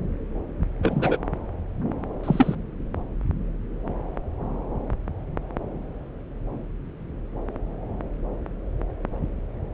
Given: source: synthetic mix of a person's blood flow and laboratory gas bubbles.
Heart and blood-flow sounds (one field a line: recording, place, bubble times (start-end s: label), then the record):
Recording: Doppler ultrasound of blood flow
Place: subclavian vein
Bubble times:
0.82-1.17 s: bubbles
2.23-2.55 s: bubbles
From the record:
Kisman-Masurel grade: 112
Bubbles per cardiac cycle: 1 to 2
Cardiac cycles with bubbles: 1 to 10%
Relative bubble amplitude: moderate (0.250 to 0.450)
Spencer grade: 1 (occasional bubble signal discernible with the cardiac motion signal, with majority of cardiac periods free of bubbles)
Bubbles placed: anywhere in the cardiac cycle